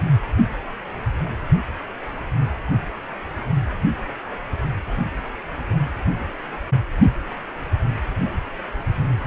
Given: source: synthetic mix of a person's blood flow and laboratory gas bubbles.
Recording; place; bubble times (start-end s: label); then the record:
Doppler ultrasound of blood flow; precordium
no bubbles
From the record:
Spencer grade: 0 (complete lack of bubble signals)